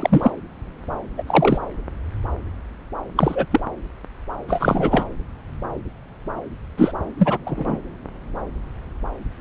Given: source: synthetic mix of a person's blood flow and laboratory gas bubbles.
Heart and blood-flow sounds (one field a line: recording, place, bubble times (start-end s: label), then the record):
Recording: Doppler ultrasound of blood flow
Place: subclavian vein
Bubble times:
0.00-0.31 s: bubbles
1.18-1.23 s: bubbles
1.27-1.58 s: bubbles
3.16-3.46 s: bubbles
3.51-3.60 s: bubbles
4.48-5.06 s: bubbles
6.78-6.92 s: bubbles
7.19-7.38 s: bubbles
7.46-7.79 s: bubbles
From the record:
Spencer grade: 2 (many but less than half of the cardiac periods contain bubble signals, singularly or in groups)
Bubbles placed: anywhere in the cardiac cycle